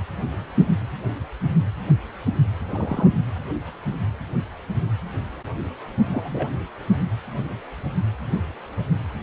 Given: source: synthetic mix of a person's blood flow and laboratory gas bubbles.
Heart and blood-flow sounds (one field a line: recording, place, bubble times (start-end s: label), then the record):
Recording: Doppler ultrasound of blood flow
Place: precordium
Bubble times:
2.70-3.08 s: bubbles
6.09-6.47 s: bubbles
From the record:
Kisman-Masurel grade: 111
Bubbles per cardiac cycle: 1 to 2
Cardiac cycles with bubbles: 1 to 10%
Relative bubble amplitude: barely perceptible (0.100 to 0.250)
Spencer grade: 1 (occasional bubble signal discernible with the cardiac motion signal, with majority of cardiac periods free of bubbles)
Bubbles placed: anywhere in the cardiac cycle